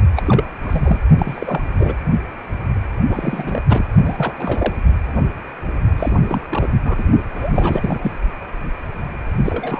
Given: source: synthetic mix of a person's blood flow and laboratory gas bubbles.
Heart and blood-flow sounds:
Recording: Doppler ultrasound of blood flow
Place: precordium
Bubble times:
0.16-0.44 s: bubbles
0.63-1.02 s: bubbles
1.17-1.63 s: bubbles
1.78-1.94 s: bubbles
3.09-3.62 s: bubbles
3.69-3.84 s: bubbles
4.05-4.73 s: bubbles
5.97-6.12 s: bubbles
6.21-6.41 s: bubbles
6.50-6.69 s: bubbles
6.84-7.04 s: bubbles
7.34-8.12 s: bubbles
9.45-9.80 s: bubbles
From the record:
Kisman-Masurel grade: 332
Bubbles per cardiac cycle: rolling drumbeat, 9 or more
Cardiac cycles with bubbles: 50 to 99%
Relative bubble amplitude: moderate (0.250 to 0.450)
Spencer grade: 3 (all of the cardiac periods contain showers or single bubble signals, but not dominating or overriding the cardiac motion signals)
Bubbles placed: only in the low amplitude regions of the cardiac cycle

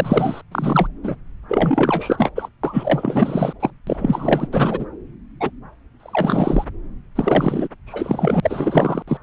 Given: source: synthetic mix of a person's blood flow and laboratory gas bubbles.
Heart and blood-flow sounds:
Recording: Doppler ultrasound of blood flow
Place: subclavian vein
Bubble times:
0.00-0.41 s: bubbles
0.51-0.88 s: bubbles
1.03-1.16 s: bubbles
1.48-2.31 s: bubbles
2.35-2.49 s: bubbles
2.63-3.53 s: bubbles
3.59-3.70 s: bubbles
3.87-4.49 s: bubbles
4.52-4.86 s: bubbles
5.40-5.51 s: bubbles
6.00-6.65 s: bubbles
7.15-7.68 s: bubbles
7.87-9.03 s: bubbles
9.07-9.17 s: bubbles
From the record:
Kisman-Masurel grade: 444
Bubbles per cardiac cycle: continuous sound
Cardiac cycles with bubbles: 100%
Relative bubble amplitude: maximal (0.775 to 0.999)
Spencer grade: 4 (maximum detectable bubble signal sounding continuously throughout systole and diastole of every cardiac period, and overriding the amplitude of the normal cardiac signals)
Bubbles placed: anywhere in the cardiac cycle

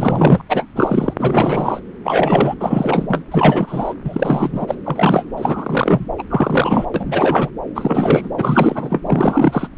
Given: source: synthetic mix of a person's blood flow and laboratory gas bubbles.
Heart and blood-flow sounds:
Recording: Doppler ultrasound of blood flow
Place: subclavian vein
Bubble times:
0.00-0.41 s: bubbles
0.49-0.66 s: bubbles
0.75-1.14 s: bubbles
1.19-1.80 s: bubbles
2.04-2.54 s: bubbles
2.60-3.23 s: bubbles
3.31-3.94 s: bubbles
4.05-4.75 s: bubbles
4.85-5.25 s: bubbles
5.36-6.05 s: bubbles
6.18-6.23 s: bubbles
6.30-6.85 s: bubbles
6.94-7.49 s: bubbles
7.75-8.29 s: bubbles
8.38-9.02 s: bubbles
9.06-9.68 s: bubbles
From the record:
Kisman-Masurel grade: 343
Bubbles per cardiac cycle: rolling drumbeat, 9 or more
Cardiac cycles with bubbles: 100%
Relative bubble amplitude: loud (0.450 to 0.775)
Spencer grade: 3 (all of the cardiac periods contain showers or single bubble signals, but not dominating or overriding the cardiac motion signals)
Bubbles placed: anywhere in the cardiac cycle

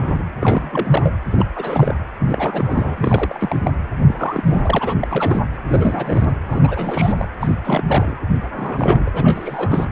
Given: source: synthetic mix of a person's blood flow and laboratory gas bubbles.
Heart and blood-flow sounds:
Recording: Doppler ultrasound of blood flow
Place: precordium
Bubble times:
0.00-0.24 s: bubbles
0.40-1.01 s: bubbles
1.04-1.12 s: bubbles
1.31-1.45 s: bubbles
1.55-1.95 s: bubbles
2.19-3.58 s: bubbles
3.63-3.71 s: bubbles
4.07-4.96 s: bubbles
5.01-5.07 s: bubbles
5.10-5.40 s: bubbles
5.67-6.37 s: bubbles
6.46-7.26 s: bubbles
7.40-7.56 s: bubbles
7.64-7.83 s: bubbles
7.86-8.14 s: bubbles
8.54-9.11 s: bubbles
9.13-9.88 s: bubbles
From the record:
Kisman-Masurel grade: 342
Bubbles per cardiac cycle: rolling drumbeat, 9 or more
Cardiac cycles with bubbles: 100%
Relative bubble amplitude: moderate (0.250 to 0.450)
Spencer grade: 3 (all of the cardiac periods contain showers or single bubble signals, but not dominating or overriding the cardiac motion signals)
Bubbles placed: anywhere in the cardiac cycle

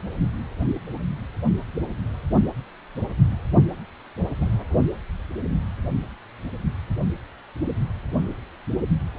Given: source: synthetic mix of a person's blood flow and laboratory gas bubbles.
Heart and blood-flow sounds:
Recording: Doppler ultrasound of blood flow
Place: precordium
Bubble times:
4.39-4.48 s: bubbles
From the record:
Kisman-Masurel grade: 111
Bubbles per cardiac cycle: 1 to 2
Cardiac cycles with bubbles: 1 to 10%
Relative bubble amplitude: barely perceptible (0.100 to 0.250)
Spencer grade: 1 (occasional bubble signal discernible with the cardiac motion signal, with majority of cardiac periods free of bubbles)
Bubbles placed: anywhere in the cardiac cycle

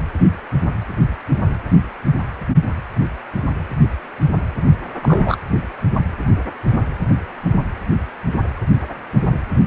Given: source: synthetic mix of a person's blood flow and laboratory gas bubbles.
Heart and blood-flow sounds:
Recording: Doppler ultrasound of blood flow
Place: precordium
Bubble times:
5.02-5.37 s: bubbles
From the record:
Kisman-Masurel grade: 113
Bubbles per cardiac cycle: 1 to 2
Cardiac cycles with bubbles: 1 to 10%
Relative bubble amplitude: loud (0.450 to 0.775)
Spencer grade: 1 (occasional bubble signal discernible with the cardiac motion signal, with majority of cardiac periods free of bubbles)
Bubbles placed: anywhere in the cardiac cycle

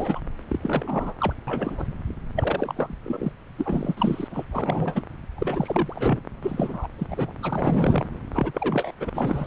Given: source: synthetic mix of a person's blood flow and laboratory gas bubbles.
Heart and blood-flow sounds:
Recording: Doppler ultrasound of blood flow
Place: subclavian vein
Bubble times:
0.00-0.21 s: bubbles
0.49-1.13 s: bubbles
1.18-1.33 s: bubbles
1.47-1.87 s: bubbles
2.35-2.98 s: bubbles
3.04-3.32 s: bubbles
3.57-4.28 s: bubbles
4.30-4.45 s: bubbles
4.52-5.03 s: bubbles
5.38-6.20 s: bubbles
6.42-6.88 s: bubbles
6.98-7.32 s: bubbles
7.42-8.06 s: bubbles
8.31-8.52 s: bubbles
8.54-8.91 s: bubbles
9.00-9.10 s: bubbles
9.14-9.47 s: bubbles
From the record:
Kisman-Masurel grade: 342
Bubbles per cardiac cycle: rolling drumbeat, 9 or more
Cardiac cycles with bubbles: 100%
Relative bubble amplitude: moderate (0.250 to 0.450)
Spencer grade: 3 (all of the cardiac periods contain showers or single bubble signals, but not dominating or overriding the cardiac motion signals)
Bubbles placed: anywhere in the cardiac cycle

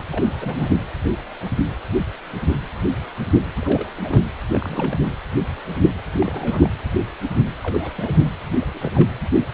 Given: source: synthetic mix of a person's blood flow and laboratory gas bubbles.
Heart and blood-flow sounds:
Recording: Doppler ultrasound of blood flow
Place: precordium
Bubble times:
0.10-0.73 s: bubbles
3.59-3.88 s: bubbles
3.97-4.23 s: bubbles
4.53-5.09 s: bubbles
6.12-6.70 s: bubbles
7.62-7.92 s: bubbles
7.96-8.29 s: bubbles
8.60-8.65 s: bubbles
8.74-8.91 s: bubbles
8.95-9.10 s: bubbles
From the record:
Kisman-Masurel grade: 221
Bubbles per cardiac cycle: several, 3 to 8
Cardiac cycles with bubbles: 10 to 50%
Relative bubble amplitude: barely perceptible (0.100 to 0.250)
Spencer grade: 2 (many but less than half of the cardiac periods contain bubble signals, singularly or in groups)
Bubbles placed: anywhere in the cardiac cycle

